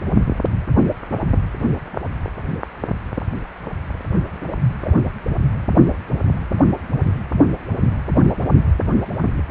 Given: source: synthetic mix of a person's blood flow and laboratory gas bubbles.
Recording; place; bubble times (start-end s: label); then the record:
Doppler ultrasound of blood flow; precordium
4.84-4.90 s: bubbles
From the record:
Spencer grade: 2 (many but less than half of the cardiac periods contain bubble signals, singularly or in groups); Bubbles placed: only in the low amplitude regions of the cardiac cycle